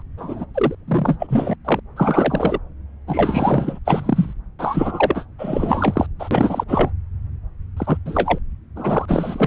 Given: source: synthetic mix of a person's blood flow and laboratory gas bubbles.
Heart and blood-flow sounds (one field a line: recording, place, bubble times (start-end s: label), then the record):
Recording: Doppler ultrasound of blood flow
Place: subclavian vein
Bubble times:
0.00-0.02 s: bubbles
0.17-0.45 s: bubbles
0.54-0.75 s: bubbles
0.87-1.56 s: bubbles
1.65-1.80 s: bubbles
1.96-2.58 s: bubbles
3.07-3.79 s: bubbles
3.85-4.33 s: bubbles
4.59-5.25 s: bubbles
5.38-6.07 s: bubbles
6.19-6.64 s: bubbles
6.68-6.90 s: bubbles
7.76-7.98 s: bubbles
8.05-8.39 s: bubbles
8.75-9.47 s: bubbles
From the record:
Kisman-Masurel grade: 444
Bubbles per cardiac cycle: continuous sound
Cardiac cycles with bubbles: 100%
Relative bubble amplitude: maximal (0.775 to 0.999)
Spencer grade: 4 (maximum detectable bubble signal sounding continuously throughout systole and diastole of every cardiac period, and overriding the amplitude of the normal cardiac signals)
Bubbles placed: anywhere in the cardiac cycle